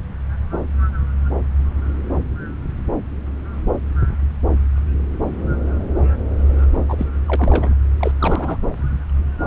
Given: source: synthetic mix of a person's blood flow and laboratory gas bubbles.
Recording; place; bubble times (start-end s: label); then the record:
Doppler ultrasound of blood flow; subclavian vein
6.88-7.06 s: bubbles
7.26-7.36 s: bubbles
7.38-7.75 s: bubbles
7.99-8.12 s: bubbles
8.20-8.57 s: bubbles
From the record:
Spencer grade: 2 (many but less than half of the cardiac periods contain bubble signals, singularly or in groups); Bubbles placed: anywhere in the cardiac cycle